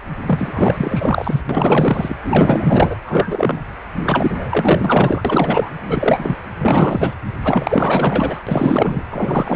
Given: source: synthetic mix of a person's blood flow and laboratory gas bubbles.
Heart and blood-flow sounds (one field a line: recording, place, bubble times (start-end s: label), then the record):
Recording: Doppler ultrasound of blood flow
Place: precordium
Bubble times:
0.27-1.41 s: bubbles
1.49-2.17 s: bubbles
2.23-2.95 s: bubbles
3.06-3.62 s: bubbles
4.04-5.70 s: bubbles
5.84-6.37 s: bubbles
6.59-7.15 s: bubbles
7.44-8.40 s: bubbles
8.46-9.04 s: bubbles
9.10-9.56 s: bubbles
From the record:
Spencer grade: 4 (maximum detectable bubble signal sounding continuously throughout systole and diastole of every cardiac period, and overriding the amplitude of the normal cardiac signals)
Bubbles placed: anywhere in the cardiac cycle